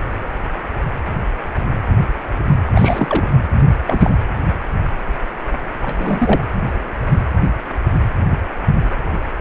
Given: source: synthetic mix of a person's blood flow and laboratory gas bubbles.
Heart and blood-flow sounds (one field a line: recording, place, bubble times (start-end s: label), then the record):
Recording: Doppler ultrasound of blood flow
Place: precordium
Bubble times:
2.74-3.29 s: bubbles
3.87-4.13 s: bubbles
5.82-6.45 s: bubbles
From the record:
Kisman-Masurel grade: 222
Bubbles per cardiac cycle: several, 3 to 8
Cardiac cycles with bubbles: 10 to 50%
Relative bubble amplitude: moderate (0.250 to 0.450)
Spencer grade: 2 (many but less than half of the cardiac periods contain bubble signals, singularly or in groups)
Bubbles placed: anywhere in the cardiac cycle